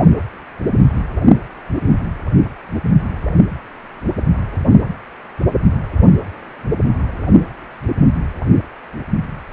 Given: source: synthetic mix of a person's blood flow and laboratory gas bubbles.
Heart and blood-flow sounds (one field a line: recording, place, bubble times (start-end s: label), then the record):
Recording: Doppler ultrasound of blood flow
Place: precordium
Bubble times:
no bubbles
From the record:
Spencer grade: 0 (complete lack of bubble signals)